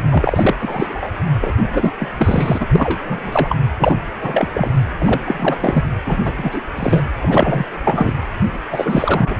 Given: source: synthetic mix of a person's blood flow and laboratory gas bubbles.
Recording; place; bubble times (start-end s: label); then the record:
Doppler ultrasound of blood flow; precordium
0.09-0.55 s: bubbles
0.59-1.10 s: bubbles
1.40-1.54 s: bubbles
1.73-1.90 s: bubbles
1.98-2.10 s: bubbles
2.19-2.67 s: bubbles
2.72-3.00 s: bubbles
3.04-3.57 s: bubbles
3.77-3.96 s: bubbles
4.20-4.71 s: bubbles
4.98-5.21 s: bubbles
5.25-5.84 s: bubbles
6.06-6.33 s: bubbles
6.37-6.61 s: bubbles
6.75-7.05 s: bubbles
7.22-7.65 s: bubbles
7.73-8.12 s: bubbles
8.71-9.36 s: bubbles
From the record:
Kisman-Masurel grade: 333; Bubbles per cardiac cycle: rolling drumbeat, 9 or more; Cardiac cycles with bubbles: 50 to 99%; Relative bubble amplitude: loud (0.450 to 0.775); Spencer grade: 3 (all of the cardiac periods contain showers or single bubble signals, but not dominating or overriding the cardiac motion signals); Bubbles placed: anywhere in the cardiac cycle